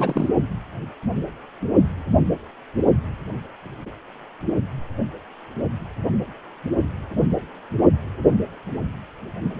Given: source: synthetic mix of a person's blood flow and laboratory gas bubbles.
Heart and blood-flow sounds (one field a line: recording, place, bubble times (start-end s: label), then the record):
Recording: Doppler ultrasound of blood flow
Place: precordium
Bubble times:
0.00-0.28 s: bubbles
From the record:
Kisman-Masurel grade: 213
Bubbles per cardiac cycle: several, 3 to 8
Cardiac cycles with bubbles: 1 to 10%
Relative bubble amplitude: loud (0.450 to 0.775)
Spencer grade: 1 (occasional bubble signal discernible with the cardiac motion signal, with majority of cardiac periods free of bubbles)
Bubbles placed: anywhere in the cardiac cycle